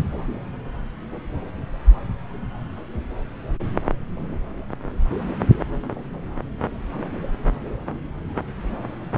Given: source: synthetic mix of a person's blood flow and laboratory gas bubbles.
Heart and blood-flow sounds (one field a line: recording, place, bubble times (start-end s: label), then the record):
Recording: Doppler ultrasound of blood flow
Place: subclavian vein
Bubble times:
no bubbles
From the record:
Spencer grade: 0 (complete lack of bubble signals)